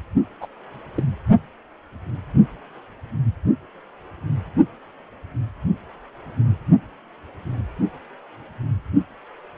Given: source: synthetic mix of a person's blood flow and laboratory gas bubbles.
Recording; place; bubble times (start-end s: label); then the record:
Doppler ultrasound of blood flow; precordium
0.41-0.47 s: bubbles
0.96-1.03 s: bubbles
From the record:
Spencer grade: 1 (occasional bubble signal discernible with the cardiac motion signal, with majority of cardiac periods free of bubbles); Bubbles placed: only in the low amplitude regions of the cardiac cycle